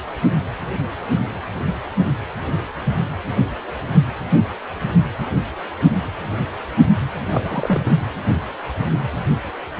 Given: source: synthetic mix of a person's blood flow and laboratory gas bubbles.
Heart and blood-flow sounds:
Doppler ultrasound of blood flow; precordium
7.29-7.96 s: bubbles
From the record:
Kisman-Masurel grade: 112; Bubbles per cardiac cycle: 1 to 2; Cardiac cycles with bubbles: 1 to 10%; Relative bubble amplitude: moderate (0.250 to 0.450); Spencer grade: 1 (occasional bubble signal discernible with the cardiac motion signal, with majority of cardiac periods free of bubbles); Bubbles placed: anywhere in the cardiac cycle

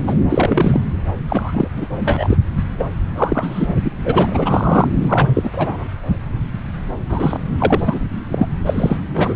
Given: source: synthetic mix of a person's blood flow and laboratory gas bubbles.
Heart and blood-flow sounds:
Doppler ultrasound of blood flow; subclavian vein
0.07-0.16 s: bubbles
0.29-0.80 s: bubbles
1.29-1.69 s: bubbles
1.76-1.87 s: bubbles
2.00-2.38 s: bubbles
2.79-2.87 s: bubbles
3.16-3.67 s: bubbles
3.85-3.91 s: bubbles
4.02-4.90 s: bubbles
5.01-5.50 s: bubbles
5.52-5.88 s: bubbles
7.09-7.38 s: bubbles
7.58-8.08 s: bubbles
8.30-8.47 s: bubbles
8.65-8.97 s: bubbles
9.13-9.34 s: bubbles
From the record:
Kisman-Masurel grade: 333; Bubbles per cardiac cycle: rolling drumbeat, 9 or more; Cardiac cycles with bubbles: 50 to 99%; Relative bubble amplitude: loud (0.450 to 0.775); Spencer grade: 3 (all of the cardiac periods contain showers or single bubble signals, but not dominating or overriding the cardiac motion signals); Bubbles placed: anywhere in the cardiac cycle

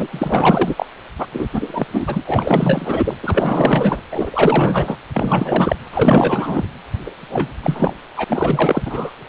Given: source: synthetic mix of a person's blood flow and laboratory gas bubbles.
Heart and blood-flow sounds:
Doppler ultrasound of blood flow; precordium
0.00-0.07 s: bubbles
0.10-0.86 s: bubbles
1.18-1.27 s: bubbles
1.32-1.49 s: bubbles
1.53-1.86 s: bubbles
1.92-2.21 s: bubbles
2.26-3.15 s: bubbles
3.23-4.02 s: bubbles
4.11-4.98 s: bubbles
5.13-5.76 s: bubbles
5.93-6.67 s: bubbles
7.06-7.11 s: bubbles
7.21-7.54 s: bubbles
7.62-7.94 s: bubbles
8.17-8.25 s: bubbles
8.29-9.11 s: bubbles
From the record:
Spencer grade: 4 (maximum detectable bubble signal sounding continuously throughout systole and diastole of every cardiac period, and overriding the amplitude of the normal cardiac signals); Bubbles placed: anywhere in the cardiac cycle

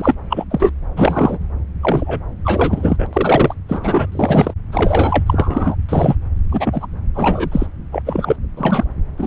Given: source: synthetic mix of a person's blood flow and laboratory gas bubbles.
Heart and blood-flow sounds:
Doppler ultrasound of blood flow; subclavian vein
0.00-0.15 s: bubbles
0.29-0.44 s: bubbles
0.51-0.72 s: bubbles
0.96-1.38 s: bubbles
1.82-2.20 s: bubbles
2.45-3.06 s: bubbles
3.12-3.54 s: bubbles
3.69-4.06 s: bubbles
4.11-4.53 s: bubbles
4.72-5.23 s: bubbles
5.26-5.75 s: bubbles
5.88-6.15 s: bubbles
6.51-6.87 s: bubbles
7.14-7.67 s: bubbles
7.91-8.02 s: bubbles
8.06-8.36 s: bubbles
8.57-8.84 s: bubbles
9.16-9.27 s: bubbles
From the record:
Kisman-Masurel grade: 243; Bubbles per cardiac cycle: several, 3 to 8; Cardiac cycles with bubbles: 100%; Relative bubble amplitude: loud (0.450 to 0.775); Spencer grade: 3 (all of the cardiac periods contain showers or single bubble signals, but not dominating or overriding the cardiac motion signals); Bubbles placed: anywhere in the cardiac cycle

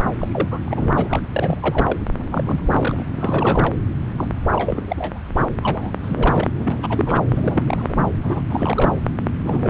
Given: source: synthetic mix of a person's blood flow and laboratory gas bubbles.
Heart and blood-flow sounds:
Doppler ultrasound of blood flow; subclavian vein
0.18-0.27 s: bubbles
0.31-0.48 s: bubbles
0.51-0.60 s: bubbles
0.65-1.20 s: bubbles
1.32-1.98 s: bubbles
2.19-3.05 s: bubbles
3.15-3.73 s: bubbles
4.17-4.28 s: bubbles
4.53-5.19 s: bubbles
5.35-5.46 s: bubbles
5.60-5.91 s: bubbles
6.03-6.48 s: bubbles
6.56-7.22 s: bubbles
7.29-8.04 s: bubbles
8.23-8.41 s: bubbles
8.49-9.01 s: bubbles
9.43-9.70 s: bubbles
From the record:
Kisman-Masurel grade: 342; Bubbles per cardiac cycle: rolling drumbeat, 9 or more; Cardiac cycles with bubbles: 100%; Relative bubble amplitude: moderate (0.250 to 0.450); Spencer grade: 3 (all of the cardiac periods contain showers or single bubble signals, but not dominating or overriding the cardiac motion signals); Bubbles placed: anywhere in the cardiac cycle

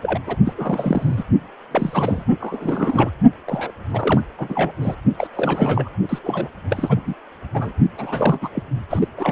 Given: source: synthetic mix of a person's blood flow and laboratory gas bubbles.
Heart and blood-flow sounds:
Doppler ultrasound of blood flow; precordium
0.02-0.20 s: bubbles
0.26-0.36 s: bubbles
0.45-0.53 s: bubbles
0.57-1.24 s: bubbles
1.71-2.24 s: bubbles
2.40-3.10 s: bubbles
3.47-3.71 s: bubbles
3.89-4.21 s: bubbles
4.38-4.72 s: bubbles
4.81-4.95 s: bubbles
5.18-5.27 s: bubbles
5.33-5.89 s: bubbles
6.09-6.19 s: bubbles
6.23-6.48 s: bubbles
6.70-7.00 s: bubbles
7.06-7.14 s: bubbles
7.54-7.73 s: bubbles
7.98-8.39 s: bubbles
8.42-8.49 s: bubbles
8.54-8.63 s: bubbles
8.90-9.08 s: bubbles
9.16-9.31 s: bubbles
From the record:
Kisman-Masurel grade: 342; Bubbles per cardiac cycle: rolling drumbeat, 9 or more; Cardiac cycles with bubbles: 100%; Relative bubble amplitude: moderate (0.250 to 0.450); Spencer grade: 3 (all of the cardiac periods contain showers or single bubble signals, but not dominating or overriding the cardiac motion signals); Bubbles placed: only in the low amplitude regions of the cardiac cycle

